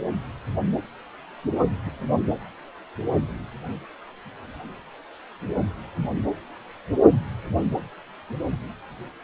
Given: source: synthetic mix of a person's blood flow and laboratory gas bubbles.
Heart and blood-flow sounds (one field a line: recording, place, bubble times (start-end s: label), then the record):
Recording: Doppler ultrasound of blood flow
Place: precordium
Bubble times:
1.86-1.91 s: bubbles
From the record:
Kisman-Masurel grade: 111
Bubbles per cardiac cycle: 1 to 2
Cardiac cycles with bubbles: 1 to 10%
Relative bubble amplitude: barely perceptible (0.100 to 0.250)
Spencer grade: 1 (occasional bubble signal discernible with the cardiac motion signal, with majority of cardiac periods free of bubbles)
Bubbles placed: anywhere in the cardiac cycle